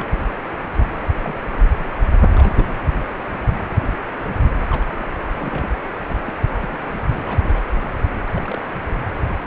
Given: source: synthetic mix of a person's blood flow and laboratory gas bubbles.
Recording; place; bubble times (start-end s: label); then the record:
Doppler ultrasound of blood flow; precordium
0.00-0.06 s: bubbles
1.02-1.12 s: bubbles
1.24-1.35 s: bubbles
2.30-2.79 s: bubbles
4.51-4.56 s: bubbles
4.70-4.83 s: bubbles
4.97-5.08 s: bubbles
5.23-5.25 s: bubbles
5.32-5.67 s: bubbles
6.26-6.33 s: bubbles
6.35-6.39 s: bubbles
6.47-6.77 s: bubbles
6.85-6.95 s: bubbles
7.06-7.63 s: bubbles
8.27-8.59 s: bubbles
8.62-8.66 s: bubbles
From the record:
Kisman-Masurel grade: 221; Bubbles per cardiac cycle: several, 3 to 8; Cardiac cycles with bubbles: 10 to 50%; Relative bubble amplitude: barely perceptible (0.100 to 0.250); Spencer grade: 2 (many but less than half of the cardiac periods contain bubble signals, singularly or in groups); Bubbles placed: anywhere in the cardiac cycle